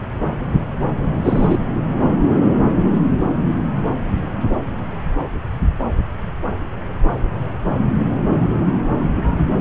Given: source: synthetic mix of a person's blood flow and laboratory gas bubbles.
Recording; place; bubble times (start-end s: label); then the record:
Doppler ultrasound of blood flow; subclavian vein
1.24-1.57 s: bubbles
From the record:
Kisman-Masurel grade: 213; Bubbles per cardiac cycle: several, 3 to 8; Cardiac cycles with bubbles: 1 to 10%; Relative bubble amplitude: loud (0.450 to 0.775); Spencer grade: 1 (occasional bubble signal discernible with the cardiac motion signal, with majority of cardiac periods free of bubbles); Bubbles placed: anywhere in the cardiac cycle